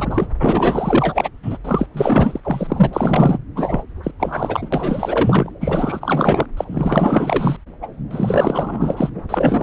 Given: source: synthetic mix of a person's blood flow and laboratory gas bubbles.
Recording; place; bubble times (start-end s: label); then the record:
Doppler ultrasound of blood flow; subclavian vein
0.00-0.27 s: bubbles
0.39-1.29 s: bubbles
1.42-1.57 s: bubbles
1.64-1.86 s: bubbles
1.93-2.40 s: bubbles
2.43-2.90 s: bubbles
2.93-3.38 s: bubbles
3.55-3.84 s: bubbles
4.03-4.12 s: bubbles
4.20-4.70 s: bubbles
4.72-5.51 s: bubbles
5.61-6.46 s: bubbles
6.56-6.64 s: bubbles
6.68-7.56 s: bubbles
7.82-7.87 s: bubbles
8.11-9.10 s: bubbles
9.29-9.63 s: bubbles
From the record:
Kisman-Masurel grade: 444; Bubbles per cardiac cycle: continuous sound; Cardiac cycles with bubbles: 100%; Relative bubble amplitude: maximal (0.775 to 0.999); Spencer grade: 4 (maximum detectable bubble signal sounding continuously throughout systole and diastole of every cardiac period, and overriding the amplitude of the normal cardiac signals); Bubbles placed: anywhere in the cardiac cycle